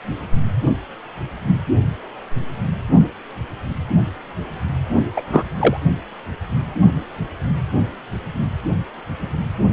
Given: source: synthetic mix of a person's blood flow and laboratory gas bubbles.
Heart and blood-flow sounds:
Doppler ultrasound of blood flow; precordium
5.16-5.21 s: bubbles
5.32-5.42 s: bubbles
5.59-5.77 s: bubbles
From the record:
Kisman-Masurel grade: 213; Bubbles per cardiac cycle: several, 3 to 8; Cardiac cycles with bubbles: 1 to 10%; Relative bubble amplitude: loud (0.450 to 0.775); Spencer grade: 1 (occasional bubble signal discernible with the cardiac motion signal, with majority of cardiac periods free of bubbles); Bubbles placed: only in the low amplitude regions of the cardiac cycle

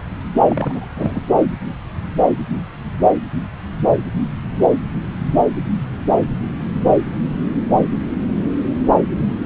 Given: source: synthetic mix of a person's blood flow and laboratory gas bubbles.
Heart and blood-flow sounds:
Doppler ultrasound of blood flow; subclavian vein
0.48-0.90 s: bubbles
0.96-1.22 s: bubbles
From the record:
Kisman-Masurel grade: 212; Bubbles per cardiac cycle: several, 3 to 8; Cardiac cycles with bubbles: 1 to 10%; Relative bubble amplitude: moderate (0.250 to 0.450); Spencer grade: 1 (occasional bubble signal discernible with the cardiac motion signal, with majority of cardiac periods free of bubbles); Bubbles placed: anywhere in the cardiac cycle

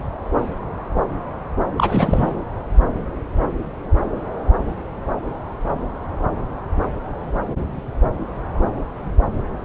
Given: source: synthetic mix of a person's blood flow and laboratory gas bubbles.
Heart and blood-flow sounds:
Doppler ultrasound of blood flow; subclavian vein
1.76-2.38 s: bubbles
From the record:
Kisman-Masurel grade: 212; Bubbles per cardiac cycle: several, 3 to 8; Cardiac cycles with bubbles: 1 to 10%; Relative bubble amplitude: moderate (0.250 to 0.450); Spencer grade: 1 (occasional bubble signal discernible with the cardiac motion signal, with majority of cardiac periods free of bubbles); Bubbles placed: anywhere in the cardiac cycle

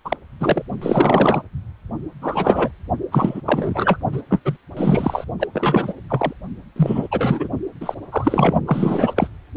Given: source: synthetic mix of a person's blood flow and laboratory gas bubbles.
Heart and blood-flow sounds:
Doppler ultrasound of blood flow; precordium
0.04-0.16 s: bubbles
0.40-0.62 s: bubbles
0.81-1.43 s: bubbles
2.22-2.72 s: bubbles
3.12-3.41 s: bubbles
3.46-3.98 s: bubbles
4.12-4.22 s: bubbles
4.29-4.40 s: bubbles
4.45-4.57 s: bubbles
4.76-5.25 s: bubbles
5.39-5.47 s: bubbles
5.53-5.94 s: bubbles
6.08-6.33 s: bubbles
6.76-7.08 s: bubbles
7.11-7.48 s: bubbles
7.80-7.95 s: bubbles
8.12-8.54 s: bubbles
8.65-9.28 s: bubbles
From the record:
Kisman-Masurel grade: 343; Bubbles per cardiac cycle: rolling drumbeat, 9 or more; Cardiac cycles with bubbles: 100%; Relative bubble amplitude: loud (0.450 to 0.775); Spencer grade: 3 (all of the cardiac periods contain showers or single bubble signals, but not dominating or overriding the cardiac motion signals); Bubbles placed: only in the low amplitude regions of the cardiac cycle

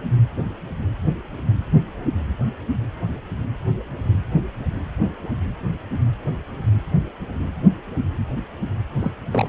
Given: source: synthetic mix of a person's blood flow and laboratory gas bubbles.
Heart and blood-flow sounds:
Doppler ultrasound of blood flow; precordium
9.00-9.12 s: bubbles
9.32-9.49 s: bubbles
From the record:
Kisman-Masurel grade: 112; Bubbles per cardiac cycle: 1 to 2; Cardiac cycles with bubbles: 1 to 10%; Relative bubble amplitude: moderate (0.250 to 0.450); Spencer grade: 1 (occasional bubble signal discernible with the cardiac motion signal, with majority of cardiac periods free of bubbles); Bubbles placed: anywhere in the cardiac cycle

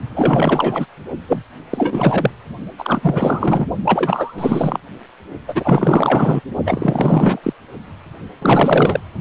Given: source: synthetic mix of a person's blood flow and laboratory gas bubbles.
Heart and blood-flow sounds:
Doppler ultrasound of blood flow; precordium
0.10-0.86 s: bubbles
1.29-1.43 s: bubbles
1.70-2.34 s: bubbles
2.78-3.67 s: bubbles
3.84-4.79 s: bubbles
5.48-6.41 s: bubbles
6.65-7.40 s: bubbles
7.43-7.54 s: bubbles
8.41-9.04 s: bubbles
From the record:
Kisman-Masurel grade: 444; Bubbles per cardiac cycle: continuous sound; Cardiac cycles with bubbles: 100%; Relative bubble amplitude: maximal (0.775 to 0.999); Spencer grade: 4 (maximum detectable bubble signal sounding continuously throughout systole and diastole of every cardiac period, and overriding the amplitude of the normal cardiac signals); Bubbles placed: only in the low amplitude regions of the cardiac cycle

